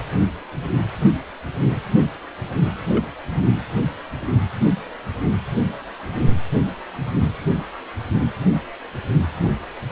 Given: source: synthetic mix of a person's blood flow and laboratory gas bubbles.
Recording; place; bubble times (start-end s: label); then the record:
Doppler ultrasound of blood flow; precordium
2.88-3.04 s: bubbles
From the record:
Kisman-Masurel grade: 111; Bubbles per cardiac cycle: 1 to 2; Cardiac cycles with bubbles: 1 to 10%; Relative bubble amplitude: barely perceptible (0.100 to 0.250); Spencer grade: 1 (occasional bubble signal discernible with the cardiac motion signal, with majority of cardiac periods free of bubbles); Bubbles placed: anywhere in the cardiac cycle